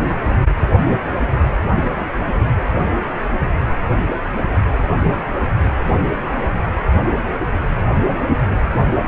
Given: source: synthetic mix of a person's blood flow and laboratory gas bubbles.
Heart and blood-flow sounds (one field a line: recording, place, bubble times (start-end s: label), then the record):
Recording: Doppler ultrasound of blood flow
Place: precordium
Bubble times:
no bubbles
From the record:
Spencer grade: 0 (complete lack of bubble signals)